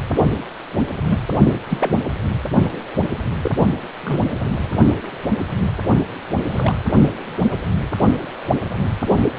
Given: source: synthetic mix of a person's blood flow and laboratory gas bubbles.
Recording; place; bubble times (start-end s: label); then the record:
Doppler ultrasound of blood flow; precordium
1.10-1.21 s: bubbles
1.69-1.98 s: bubbles
3.43-3.51 s: bubbles
4.03-4.21 s: bubbles
6.51-6.75 s: bubbles
From the record:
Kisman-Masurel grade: 122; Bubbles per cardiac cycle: 1 to 2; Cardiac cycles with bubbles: 10 to 50%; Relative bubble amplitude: moderate (0.250 to 0.450); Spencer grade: 2 (many but less than half of the cardiac periods contain bubble signals, singularly or in groups); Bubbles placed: anywhere in the cardiac cycle